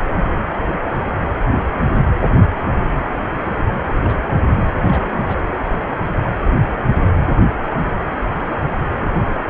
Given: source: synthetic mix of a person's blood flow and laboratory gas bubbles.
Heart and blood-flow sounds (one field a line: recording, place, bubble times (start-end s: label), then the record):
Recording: Doppler ultrasound of blood flow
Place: precordium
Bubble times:
3.86-4.01 s: bubbles
4.04-4.18 s: bubbles
4.31-4.46 s: bubbles
4.73-5.09 s: bubbles
5.13-5.37 s: bubbles
From the record:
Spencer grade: 2 (many but less than half of the cardiac periods contain bubble signals, singularly or in groups)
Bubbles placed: anywhere in the cardiac cycle